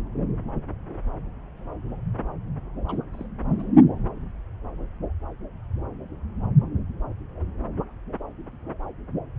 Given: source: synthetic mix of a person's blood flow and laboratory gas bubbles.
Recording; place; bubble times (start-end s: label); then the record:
Doppler ultrasound of blood flow; subclavian vein
2.86-2.98 s: bubbles
3.14-3.27 s: bubbles
3.50-3.69 s: bubbles
From the record:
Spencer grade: 2 (many but less than half of the cardiac periods contain bubble signals, singularly or in groups); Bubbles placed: anywhere in the cardiac cycle